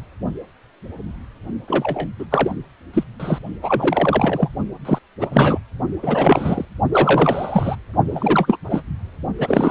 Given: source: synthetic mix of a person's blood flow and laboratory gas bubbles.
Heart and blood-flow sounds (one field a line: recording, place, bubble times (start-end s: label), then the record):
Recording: Doppler ultrasound of blood flow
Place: precordium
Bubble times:
1.67-2.07 s: bubbles
2.19-2.25 s: bubbles
2.30-2.57 s: bubbles
2.94-3.04 s: bubbles
3.19-3.38 s: bubbles
3.62-4.49 s: bubbles
4.85-4.99 s: bubbles
5.20-5.58 s: bubbles
6.02-6.65 s: bubbles
6.92-7.76 s: bubbles
8.08-8.58 s: bubbles
8.70-8.81 s: bubbles
9.38-9.71 s: bubbles
From the record:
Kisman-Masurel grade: 333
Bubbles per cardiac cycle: rolling drumbeat, 9 or more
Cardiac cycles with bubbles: 50 to 99%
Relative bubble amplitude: loud (0.450 to 0.775)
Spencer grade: 3 (all of the cardiac periods contain showers or single bubble signals, but not dominating or overriding the cardiac motion signals)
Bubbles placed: only in the low amplitude regions of the cardiac cycle